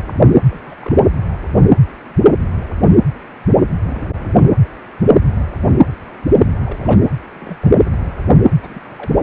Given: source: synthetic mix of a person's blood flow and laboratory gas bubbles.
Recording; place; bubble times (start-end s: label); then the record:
Doppler ultrasound of blood flow; precordium
0.51-0.75 s: bubbles
0.80-1.04 s: bubbles
3.86-4.46 s: bubbles
6.65-7.00 s: bubbles
7.34-7.57 s: bubbles
7.61-7.89 s: bubbles
8.62-8.81 s: bubbles
8.84-9.21 s: bubbles
From the record:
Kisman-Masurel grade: 221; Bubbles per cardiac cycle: several, 3 to 8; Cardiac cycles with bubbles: 10 to 50%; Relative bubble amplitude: barely perceptible (0.100 to 0.250); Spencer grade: 2 (many but less than half of the cardiac periods contain bubble signals, singularly or in groups); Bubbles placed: anywhere in the cardiac cycle